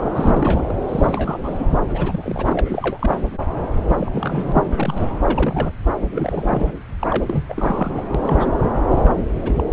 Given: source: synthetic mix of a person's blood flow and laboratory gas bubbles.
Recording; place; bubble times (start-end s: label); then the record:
Doppler ultrasound of blood flow; subclavian vein
0.00-0.12 s: bubbles
0.15-0.73 s: bubbles
0.88-1.65 s: bubbles
1.88-2.60 s: bubbles
2.65-3.23 s: bubbles
3.88-3.96 s: bubbles
4.00-5.12 s: bubbles
5.23-5.72 s: bubbles
6.12-6.73 s: bubbles
7.00-7.07 s: bubbles
7.10-7.46 s: bubbles
7.49-8.03 s: bubbles
8.14-8.51 s: bubbles
8.88-9.10 s: bubbles
9.35-9.64 s: bubbles
From the record:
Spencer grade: 3 (all of the cardiac periods contain showers or single bubble signals, but not dominating or overriding the cardiac motion signals); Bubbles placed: anywhere in the cardiac cycle